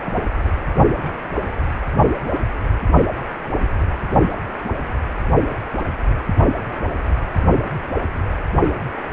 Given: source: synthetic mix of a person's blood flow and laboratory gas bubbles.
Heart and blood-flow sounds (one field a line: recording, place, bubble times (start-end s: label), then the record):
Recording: Doppler ultrasound of blood flow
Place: precordium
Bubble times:
0.07-0.12 s: bubbles
From the record:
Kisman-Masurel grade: 112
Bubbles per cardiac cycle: 1 to 2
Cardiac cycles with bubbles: 1 to 10%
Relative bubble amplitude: moderate (0.250 to 0.450)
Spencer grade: 1 (occasional bubble signal discernible with the cardiac motion signal, with majority of cardiac periods free of bubbles)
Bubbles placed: anywhere in the cardiac cycle